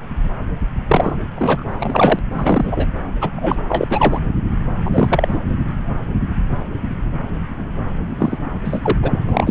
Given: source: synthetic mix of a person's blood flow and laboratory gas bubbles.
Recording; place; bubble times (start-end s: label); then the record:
Doppler ultrasound of blood flow; subclavian vein
0.88-1.16 s: bubbles
1.35-1.64 s: bubbles
1.69-2.19 s: bubbles
2.32-2.88 s: bubbles
3.21-3.29 s: bubbles
3.35-3.56 s: bubbles
3.68-4.18 s: bubbles
4.85-5.41 s: bubbles
8.19-8.38 s: bubbles
8.65-8.98 s: bubbles
9.02-9.20 s: bubbles
9.29-9.50 s: bubbles
From the record:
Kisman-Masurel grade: 233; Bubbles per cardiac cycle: several, 3 to 8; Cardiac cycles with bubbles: 50 to 99%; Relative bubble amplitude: loud (0.450 to 0.775); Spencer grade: 3 (all of the cardiac periods contain showers or single bubble signals, but not dominating or overriding the cardiac motion signals); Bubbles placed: anywhere in the cardiac cycle